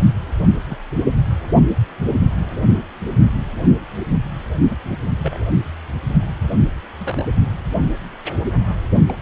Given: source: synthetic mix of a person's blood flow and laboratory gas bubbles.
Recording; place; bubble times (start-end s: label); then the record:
Doppler ultrasound of blood flow; precordium
0.67-0.79 s: bubbles
4.69-4.79 s: bubbles
5.20-5.38 s: bubbles
6.47-6.55 s: bubbles
7.00-7.26 s: bubbles
9.08-9.14 s: bubbles
From the record:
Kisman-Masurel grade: 121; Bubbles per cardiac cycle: 1 to 2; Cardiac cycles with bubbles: 10 to 50%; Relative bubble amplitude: barely perceptible (0.100 to 0.250); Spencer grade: 2 (many but less than half of the cardiac periods contain bubble signals, singularly or in groups); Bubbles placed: anywhere in the cardiac cycle